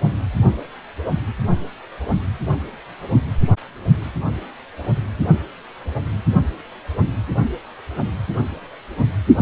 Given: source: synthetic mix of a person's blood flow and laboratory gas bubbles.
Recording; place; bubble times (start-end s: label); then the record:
Doppler ultrasound of blood flow; precordium
9.37-9.42 s: bubbles
From the record:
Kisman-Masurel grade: 113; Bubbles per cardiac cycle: 1 to 2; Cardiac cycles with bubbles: 1 to 10%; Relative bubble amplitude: loud (0.450 to 0.775); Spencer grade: 1 (occasional bubble signal discernible with the cardiac motion signal, with majority of cardiac periods free of bubbles); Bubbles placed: only in the low amplitude regions of the cardiac cycle